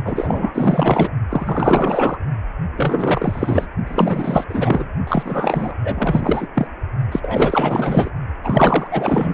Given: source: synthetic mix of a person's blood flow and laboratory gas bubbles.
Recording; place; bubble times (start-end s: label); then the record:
Doppler ultrasound of blood flow; precordium
0.05-0.52 s: bubbles
0.54-1.10 s: bubbles
1.29-2.18 s: bubbles
2.76-3.67 s: bubbles
3.87-4.44 s: bubbles
4.49-4.88 s: bubbles
5.07-5.75 s: bubbles
5.83-6.48 s: bubbles
6.54-6.67 s: bubbles
7.12-8.10 s: bubbles
8.43-8.87 s: bubbles
8.90-9.34 s: bubbles
From the record:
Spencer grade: 4 (maximum detectable bubble signal sounding continuously throughout systole and diastole of every cardiac period, and overriding the amplitude of the normal cardiac signals); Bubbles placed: only in the low amplitude regions of the cardiac cycle